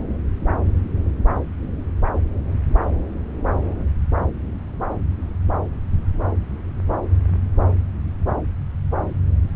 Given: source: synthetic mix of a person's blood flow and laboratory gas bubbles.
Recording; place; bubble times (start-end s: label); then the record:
Doppler ultrasound of blood flow; subclavian vein
no bubbles
From the record:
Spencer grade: 0 (complete lack of bubble signals)